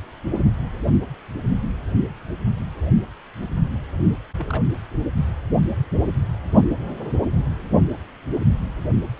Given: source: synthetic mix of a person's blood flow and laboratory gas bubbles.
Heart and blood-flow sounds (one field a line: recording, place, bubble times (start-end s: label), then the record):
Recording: Doppler ultrasound of blood flow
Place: precordium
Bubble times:
4.37-4.62 s: bubbles
From the record:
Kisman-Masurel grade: 111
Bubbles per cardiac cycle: 1 to 2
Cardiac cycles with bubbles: 1 to 10%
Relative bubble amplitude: barely perceptible (0.100 to 0.250)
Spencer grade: 1 (occasional bubble signal discernible with the cardiac motion signal, with majority of cardiac periods free of bubbles)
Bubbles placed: only in the low amplitude regions of the cardiac cycle